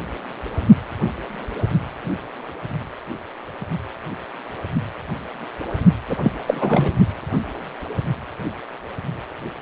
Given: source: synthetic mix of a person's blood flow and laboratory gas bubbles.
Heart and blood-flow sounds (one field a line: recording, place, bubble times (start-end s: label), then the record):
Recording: Doppler ultrasound of blood flow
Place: precordium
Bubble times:
6.09-6.17 s: bubbles
6.22-6.32 s: bubbles
6.47-6.92 s: bubbles
From the record:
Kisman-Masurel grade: 213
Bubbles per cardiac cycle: several, 3 to 8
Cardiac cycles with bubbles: 1 to 10%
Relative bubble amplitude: loud (0.450 to 0.775)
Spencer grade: 1 (occasional bubble signal discernible with the cardiac motion signal, with majority of cardiac periods free of bubbles)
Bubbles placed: only in the low amplitude regions of the cardiac cycle